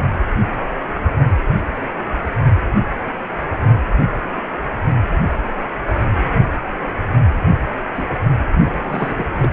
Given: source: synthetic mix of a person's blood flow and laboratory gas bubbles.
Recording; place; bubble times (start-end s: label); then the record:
Doppler ultrasound of blood flow; precordium
7.95-8.10 s: bubbles
8.54-8.62 s: bubbles
8.82-9.24 s: bubbles
9.38-9.48 s: bubbles
From the record:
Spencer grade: 2 (many but less than half of the cardiac periods contain bubble signals, singularly or in groups); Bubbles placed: anywhere in the cardiac cycle